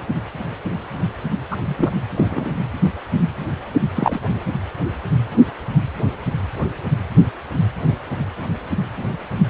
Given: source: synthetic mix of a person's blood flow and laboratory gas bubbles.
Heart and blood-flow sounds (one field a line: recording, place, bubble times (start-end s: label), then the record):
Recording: Doppler ultrasound of blood flow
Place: precordium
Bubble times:
1.51-1.56 s: bubbles
1.65-1.93 s: bubbles
2.15-2.55 s: bubbles
3.95-4.19 s: bubbles
From the record:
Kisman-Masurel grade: 123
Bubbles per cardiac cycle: 1 to 2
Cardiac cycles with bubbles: 10 to 50%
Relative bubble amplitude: loud (0.450 to 0.775)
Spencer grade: 2 (many but less than half of the cardiac periods contain bubble signals, singularly or in groups)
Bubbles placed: anywhere in the cardiac cycle